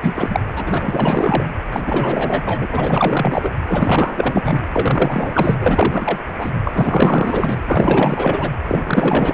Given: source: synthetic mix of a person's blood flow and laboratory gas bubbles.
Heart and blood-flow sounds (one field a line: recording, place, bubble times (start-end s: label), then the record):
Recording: Doppler ultrasound of blood flow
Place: precordium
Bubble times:
0.00-0.40 s: bubbles
0.54-1.46 s: bubbles
1.72-2.43 s: bubbles
2.46-3.53 s: bubbles
3.67-4.64 s: bubbles
4.73-5.54 s: bubbles
5.59-6.18 s: bubbles
6.37-6.51 s: bubbles
6.64-7.64 s: bubbles
7.67-8.50 s: bubbles
8.68-8.82 s: bubbles
8.84-9.33 s: bubbles
From the record:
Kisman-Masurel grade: 444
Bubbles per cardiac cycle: continuous sound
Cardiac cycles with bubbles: 100%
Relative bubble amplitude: maximal (0.775 to 0.999)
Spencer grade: 4 (maximum detectable bubble signal sounding continuously throughout systole and diastole of every cardiac period, and overriding the amplitude of the normal cardiac signals)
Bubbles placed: anywhere in the cardiac cycle